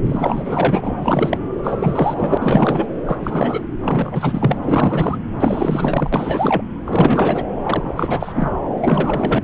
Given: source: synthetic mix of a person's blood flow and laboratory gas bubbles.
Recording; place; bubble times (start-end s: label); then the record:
Doppler ultrasound of blood flow; subclavian vein
0.06-1.39 s: bubbles
1.62-2.38 s: bubbles
2.41-2.87 s: bubbles
3.05-3.62 s: bubbles
3.82-4.58 s: bubbles
4.62-5.17 s: bubbles
5.40-6.62 s: bubbles
6.86-7.44 s: bubbles
7.62-8.54 s: bubbles
8.80-9.44 s: bubbles
From the record:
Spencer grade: 4 (maximum detectable bubble signal sounding continuously throughout systole and diastole of every cardiac period, and overriding the amplitude of the normal cardiac signals); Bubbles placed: anywhere in the cardiac cycle